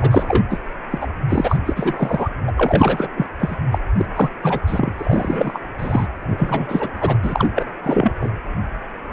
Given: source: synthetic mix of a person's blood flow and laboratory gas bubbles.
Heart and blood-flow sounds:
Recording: Doppler ultrasound of blood flow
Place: precordium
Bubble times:
0.00-0.44 s: bubbles
0.50-0.59 s: bubbles
0.91-1.07 s: bubbles
1.29-1.60 s: bubbles
1.66-1.73 s: bubbles
1.76-2.28 s: bubbles
2.47-2.52 s: bubbles
2.57-3.08 s: bubbles
3.17-3.27 s: bubbles
3.39-3.57 s: bubbles
3.71-3.79 s: bubbles
3.96-4.05 s: bubbles
4.15-4.29 s: bubbles
4.42-4.59 s: bubbles
4.67-4.92 s: bubbles
4.97-5.60 s: bubbles
5.78-6.07 s: bubbles
6.29-6.90 s: bubbles
7.00-7.18 s: bubbles
7.22-7.66 s: bubbles
7.83-8.11 s: bubbles
8.20-8.31 s: bubbles
From the record:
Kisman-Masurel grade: 333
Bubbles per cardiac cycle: rolling drumbeat, 9 or more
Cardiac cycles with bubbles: 50 to 99%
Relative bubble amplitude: loud (0.450 to 0.775)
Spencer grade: 3 (all of the cardiac periods contain showers or single bubble signals, but not dominating or overriding the cardiac motion signals)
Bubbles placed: anywhere in the cardiac cycle

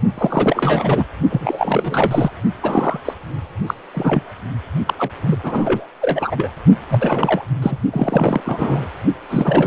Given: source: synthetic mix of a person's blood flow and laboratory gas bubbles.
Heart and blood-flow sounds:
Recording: Doppler ultrasound of blood flow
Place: precordium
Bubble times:
0.18-1.05 s: bubbles
1.29-2.30 s: bubbles
2.62-3.00 s: bubbles
3.05-3.14 s: bubbles
3.67-3.74 s: bubbles
3.93-4.21 s: bubbles
4.85-4.93 s: bubbles
4.98-5.10 s: bubbles
5.25-5.36 s: bubbles
5.43-5.86 s: bubbles
6.01-6.51 s: bubbles
6.88-7.46 s: bubbles
7.62-7.78 s: bubbles
7.91-8.40 s: bubbles
8.46-8.88 s: bubbles
9.30-9.67 s: bubbles
From the record:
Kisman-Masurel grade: 333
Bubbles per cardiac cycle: rolling drumbeat, 9 or more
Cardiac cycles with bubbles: 50 to 99%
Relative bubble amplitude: loud (0.450 to 0.775)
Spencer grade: 3 (all of the cardiac periods contain showers or single bubble signals, but not dominating or overriding the cardiac motion signals)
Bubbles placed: only in the low amplitude regions of the cardiac cycle

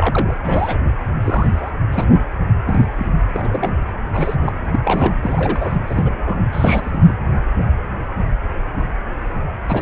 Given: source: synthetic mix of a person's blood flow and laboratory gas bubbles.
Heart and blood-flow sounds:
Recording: Doppler ultrasound of blood flow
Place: precordium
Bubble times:
0.00-0.34 s: bubbles
0.43-0.79 s: bubbles
1.21-1.72 s: bubbles
1.92-2.04 s: bubbles
2.63-3.08 s: bubbles
3.33-3.74 s: bubbles
4.13-4.35 s: bubbles
4.40-4.58 s: bubbles
4.72-4.79 s: bubbles
4.84-5.14 s: bubbles
5.22-5.78 s: bubbles
5.87-6.37 s: bubbles
6.52-7.14 s: bubbles
9.65-9.82 s: bubbles
From the record:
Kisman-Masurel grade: 232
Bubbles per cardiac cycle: several, 3 to 8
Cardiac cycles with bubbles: 50 to 99%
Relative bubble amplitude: moderate (0.250 to 0.450)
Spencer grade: 3 (all of the cardiac periods contain showers or single bubble signals, but not dominating or overriding the cardiac motion signals)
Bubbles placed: anywhere in the cardiac cycle

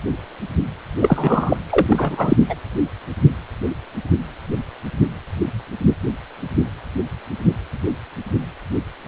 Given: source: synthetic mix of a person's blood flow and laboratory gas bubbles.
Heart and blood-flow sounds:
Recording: Doppler ultrasound of blood flow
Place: precordium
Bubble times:
1.00-1.57 s: bubbles
1.70-2.36 s: bubbles
2.49-2.55 s: bubbles
From the record:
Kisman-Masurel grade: 223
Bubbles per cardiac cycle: several, 3 to 8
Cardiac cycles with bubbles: 10 to 50%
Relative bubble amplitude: loud (0.450 to 0.775)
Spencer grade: 2 (many but less than half of the cardiac periods contain bubble signals, singularly or in groups)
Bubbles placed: anywhere in the cardiac cycle

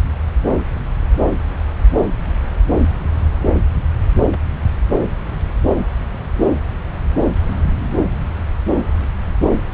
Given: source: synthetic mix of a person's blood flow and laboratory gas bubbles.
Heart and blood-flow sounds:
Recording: Doppler ultrasound of blood flow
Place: subclavian vein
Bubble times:
4.30-4.40 s: bubbles
From the record:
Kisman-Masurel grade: 111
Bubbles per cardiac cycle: 1 to 2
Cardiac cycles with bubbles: 1 to 10%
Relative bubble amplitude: barely perceptible (0.100 to 0.250)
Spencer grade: 1 (occasional bubble signal discernible with the cardiac motion signal, with majority of cardiac periods free of bubbles)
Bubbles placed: anywhere in the cardiac cycle

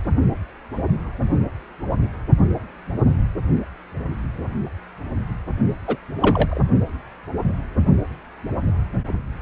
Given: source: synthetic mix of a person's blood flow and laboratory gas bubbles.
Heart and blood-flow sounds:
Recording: Doppler ultrasound of blood flow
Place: precordium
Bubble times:
5.87-5.96 s: bubbles
6.18-6.62 s: bubbles
From the record:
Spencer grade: 1 (occasional bubble signal discernible with the cardiac motion signal, with majority of cardiac periods free of bubbles)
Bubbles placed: only in the low amplitude regions of the cardiac cycle

